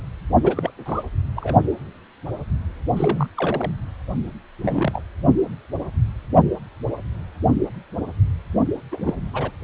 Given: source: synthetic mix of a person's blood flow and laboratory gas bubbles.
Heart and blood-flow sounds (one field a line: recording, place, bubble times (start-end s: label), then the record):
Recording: Doppler ultrasound of blood flow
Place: precordium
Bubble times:
0.43-0.70 s: bubbles
0.85-1.03 s: bubbles
1.36-1.54 s: bubbles
2.96-3.29 s: bubbles
3.35-3.71 s: bubbles
4.62-5.01 s: bubbles
8.91-9.14 s: bubbles
9.34-9.51 s: bubbles
From the record:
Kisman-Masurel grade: 222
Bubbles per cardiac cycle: several, 3 to 8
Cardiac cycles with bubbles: 10 to 50%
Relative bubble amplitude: moderate (0.250 to 0.450)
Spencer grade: 2 (many but less than half of the cardiac periods contain bubble signals, singularly or in groups)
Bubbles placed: only in the low amplitude regions of the cardiac cycle